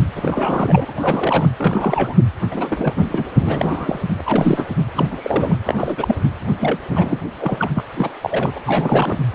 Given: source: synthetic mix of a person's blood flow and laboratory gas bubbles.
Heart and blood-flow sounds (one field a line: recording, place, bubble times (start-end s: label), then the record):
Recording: Doppler ultrasound of blood flow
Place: precordium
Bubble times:
0.15-0.85 s: bubbles
0.88-1.49 s: bubbles
1.58-2.15 s: bubbles
2.51-2.94 s: bubbles
3.10-3.27 s: bubbles
3.38-4.10 s: bubbles
4.18-4.21 s: bubbles
4.25-4.74 s: bubbles
4.95-5.58 s: bubbles
5.64-6.16 s: bubbles
6.60-6.77 s: bubbles
6.90-7.21 s: bubbles
7.38-7.71 s: bubbles
7.76-7.84 s: bubbles
7.97-8.09 s: bubbles
8.21-8.58 s: bubbles
8.65-9.18 s: bubbles
9.33-9.35 s: bubbles
From the record:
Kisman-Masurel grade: 342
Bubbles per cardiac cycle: rolling drumbeat, 9 or more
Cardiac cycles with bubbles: 100%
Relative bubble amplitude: moderate (0.250 to 0.450)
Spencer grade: 3 (all of the cardiac periods contain showers or single bubble signals, but not dominating or overriding the cardiac motion signals)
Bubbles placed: anywhere in the cardiac cycle